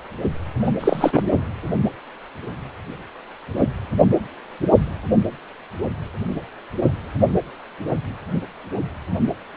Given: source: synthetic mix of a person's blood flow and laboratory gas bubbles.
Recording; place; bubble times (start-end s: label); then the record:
Doppler ultrasound of blood flow; precordium
0.64-0.71 s: bubbles
0.80-1.23 s: bubbles
From the record:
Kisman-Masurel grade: 213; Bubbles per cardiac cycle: several, 3 to 8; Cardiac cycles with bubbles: 1 to 10%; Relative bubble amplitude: loud (0.450 to 0.775); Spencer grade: 1 (occasional bubble signal discernible with the cardiac motion signal, with majority of cardiac periods free of bubbles); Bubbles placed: anywhere in the cardiac cycle